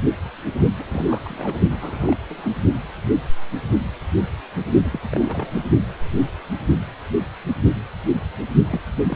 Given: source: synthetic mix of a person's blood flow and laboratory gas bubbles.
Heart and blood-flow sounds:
Doppler ultrasound of blood flow; precordium
0.78-0.83 s: bubbles
0.88-1.60 s: bubbles
1.69-2.17 s: bubbles
2.29-2.50 s: bubbles
4.83-5.00 s: bubbles
5.12-5.62 s: bubbles
8.71-8.81 s: bubbles
9.06-9.16 s: bubbles
From the record:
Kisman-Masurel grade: 221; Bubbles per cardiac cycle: several, 3 to 8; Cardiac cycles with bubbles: 10 to 50%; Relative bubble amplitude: barely perceptible (0.100 to 0.250); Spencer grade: 2 (many but less than half of the cardiac periods contain bubble signals, singularly or in groups); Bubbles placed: only in the low amplitude regions of the cardiac cycle

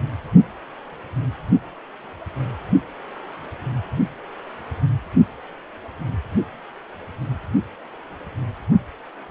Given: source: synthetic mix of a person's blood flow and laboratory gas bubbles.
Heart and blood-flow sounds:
Doppler ultrasound of blood flow; precordium
no bubbles
From the record:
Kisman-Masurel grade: 000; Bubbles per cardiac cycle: 0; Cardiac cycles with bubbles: 0%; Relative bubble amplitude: no bubbles discernible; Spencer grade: 0 (complete lack of bubble signals)

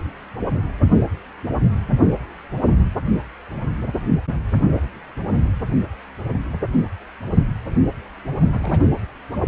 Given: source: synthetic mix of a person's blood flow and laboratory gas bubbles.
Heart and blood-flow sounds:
Doppler ultrasound of blood flow; precordium
8.49-8.88 s: bubbles
From the record:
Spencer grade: 1 (occasional bubble signal discernible with the cardiac motion signal, with majority of cardiac periods free of bubbles); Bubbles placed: only in the low amplitude regions of the cardiac cycle

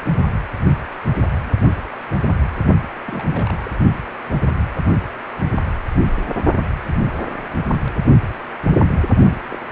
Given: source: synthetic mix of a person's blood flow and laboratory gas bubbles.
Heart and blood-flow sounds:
Doppler ultrasound of blood flow; precordium
3.06-3.71 s: bubbles
9.29-9.38 s: bubbles
9.49-9.58 s: bubbles
From the record:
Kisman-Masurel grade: 221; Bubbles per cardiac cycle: several, 3 to 8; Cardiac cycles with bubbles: 10 to 50%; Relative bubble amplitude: barely perceptible (0.100 to 0.250); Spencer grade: 2 (many but less than half of the cardiac periods contain bubble signals, singularly or in groups); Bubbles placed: only in the low amplitude regions of the cardiac cycle

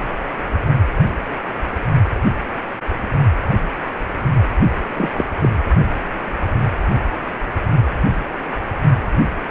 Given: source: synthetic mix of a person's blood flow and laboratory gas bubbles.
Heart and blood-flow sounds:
Doppler ultrasound of blood flow; precordium
4.96-5.11 s: bubbles
5.17-5.25 s: bubbles
5.41-5.49 s: bubbles
From the record:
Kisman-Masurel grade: 223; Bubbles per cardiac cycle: several, 3 to 8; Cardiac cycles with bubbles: 10 to 50%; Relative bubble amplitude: loud (0.450 to 0.775); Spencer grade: 2 (many but less than half of the cardiac periods contain bubble signals, singularly or in groups); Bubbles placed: only in the low amplitude regions of the cardiac cycle

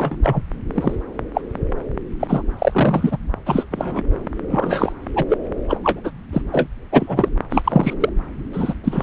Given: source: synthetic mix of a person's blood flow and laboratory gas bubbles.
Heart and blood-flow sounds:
Doppler ultrasound of blood flow; subclavian vein
0.00-0.17 s: bubbles
0.23-0.42 s: bubbles
0.75-0.96 s: bubbles
1.34-1.42 s: bubbles
2.19-2.42 s: bubbles
2.58-3.17 s: bubbles
3.46-3.66 s: bubbles
3.71-4.01 s: bubbles
4.50-4.92 s: bubbles
5.16-5.25 s: bubbles
5.29-5.38 s: bubbles
5.69-5.77 s: bubbles
5.83-6.00 s: bubbles
6.04-6.11 s: bubbles
6.33-6.42 s: bubbles
6.51-6.67 s: bubbles
6.92-7.29 s: bubbles
7.51-7.94 s: bubbles
8.00-8.09 s: bubbles
8.53-8.73 s: bubbles
8.84-9.03 s: bubbles
From the record:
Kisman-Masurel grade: 243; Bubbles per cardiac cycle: several, 3 to 8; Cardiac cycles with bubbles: 100%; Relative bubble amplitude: loud (0.450 to 0.775); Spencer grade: 3 (all of the cardiac periods contain showers or single bubble signals, but not dominating or overriding the cardiac motion signals); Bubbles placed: anywhere in the cardiac cycle

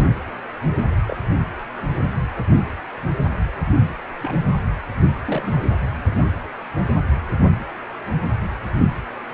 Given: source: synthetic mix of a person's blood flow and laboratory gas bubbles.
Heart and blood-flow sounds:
Doppler ultrasound of blood flow; precordium
0.00-0.10 s: bubbles
1.07-1.16 s: bubbles
4.21-4.39 s: bubbles
5.26-5.63 s: bubbles
From the record:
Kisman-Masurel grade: 121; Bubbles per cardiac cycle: 1 to 2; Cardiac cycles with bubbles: 10 to 50%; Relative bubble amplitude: barely perceptible (0.100 to 0.250); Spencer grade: 2 (many but less than half of the cardiac periods contain bubble signals, singularly or in groups); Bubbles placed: anywhere in the cardiac cycle

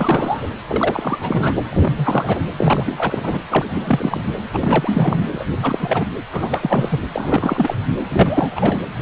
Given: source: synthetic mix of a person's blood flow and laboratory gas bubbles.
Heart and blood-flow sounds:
Doppler ultrasound of blood flow; precordium
0.00-0.50 s: bubbles
0.68-1.66 s: bubbles
1.70-2.42 s: bubbles
2.58-3.39 s: bubbles
3.49-3.67 s: bubbles
3.70-4.21 s: bubbles
4.53-5.44 s: bubbles
5.62-6.09 s: bubbles
6.33-7.04 s: bubbles
7.12-7.78 s: bubbles
8.10-8.80 s: bubbles
From the record:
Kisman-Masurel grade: 343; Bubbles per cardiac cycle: rolling drumbeat, 9 or more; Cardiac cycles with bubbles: 100%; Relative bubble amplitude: loud (0.450 to 0.775); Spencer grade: 3 (all of the cardiac periods contain showers or single bubble signals, but not dominating or overriding the cardiac motion signals); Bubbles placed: anywhere in the cardiac cycle

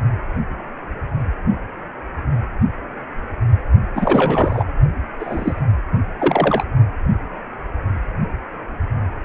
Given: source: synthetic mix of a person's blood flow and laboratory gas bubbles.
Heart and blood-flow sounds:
Doppler ultrasound of blood flow; precordium
3.95-4.65 s: bubbles
5.19-5.62 s: bubbles
6.19-6.64 s: bubbles
From the record:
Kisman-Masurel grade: 223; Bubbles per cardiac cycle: several, 3 to 8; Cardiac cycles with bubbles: 10 to 50%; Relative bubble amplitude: loud (0.450 to 0.775); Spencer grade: 2 (many but less than half of the cardiac periods contain bubble signals, singularly or in groups); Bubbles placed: only in the low amplitude regions of the cardiac cycle

